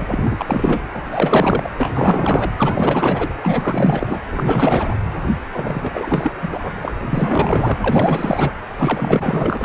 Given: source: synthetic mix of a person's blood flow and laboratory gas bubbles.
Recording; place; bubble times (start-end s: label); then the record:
Doppler ultrasound of blood flow; precordium
0.00-0.81 s: bubbles
0.93-1.02 s: bubbles
1.10-1.69 s: bubbles
1.77-1.90 s: bubbles
1.94-2.50 s: bubbles
2.58-3.34 s: bubbles
3.42-4.21 s: bubbles
4.31-4.97 s: bubbles
5.51-6.33 s: bubbles
6.42-6.59 s: bubbles
6.62-6.73 s: bubbles
6.75-6.79 s: bubbles
6.82-6.92 s: bubbles
7.10-7.75 s: bubbles
7.80-8.52 s: bubbles
8.78-9.65 s: bubbles
From the record:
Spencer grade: 4 (maximum detectable bubble signal sounding continuously throughout systole and diastole of every cardiac period, and overriding the amplitude of the normal cardiac signals); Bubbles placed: anywhere in the cardiac cycle